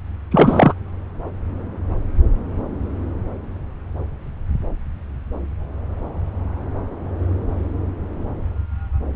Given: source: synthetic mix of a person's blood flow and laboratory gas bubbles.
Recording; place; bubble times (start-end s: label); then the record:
Doppler ultrasound of blood flow; subclavian vein
0.31-0.74 s: bubbles
From the record:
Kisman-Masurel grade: 213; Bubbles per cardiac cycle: several, 3 to 8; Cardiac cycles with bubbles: 1 to 10%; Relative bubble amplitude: loud (0.450 to 0.775); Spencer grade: 1 (occasional bubble signal discernible with the cardiac motion signal, with majority of cardiac periods free of bubbles); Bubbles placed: anywhere in the cardiac cycle